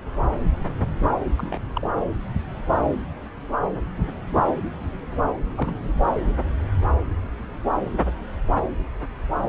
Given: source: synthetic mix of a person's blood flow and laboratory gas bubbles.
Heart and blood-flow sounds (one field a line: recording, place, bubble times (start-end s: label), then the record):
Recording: Doppler ultrasound of blood flow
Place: subclavian vein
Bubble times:
1.38-1.61 s: bubbles
1.75-1.89 s: bubbles
3.97-4.16 s: bubbles
5.57-5.75 s: bubbles
From the record:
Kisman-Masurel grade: 121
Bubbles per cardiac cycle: 1 to 2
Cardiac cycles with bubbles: 10 to 50%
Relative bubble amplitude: barely perceptible (0.100 to 0.250)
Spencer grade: 2 (many but less than half of the cardiac periods contain bubble signals, singularly or in groups)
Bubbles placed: anywhere in the cardiac cycle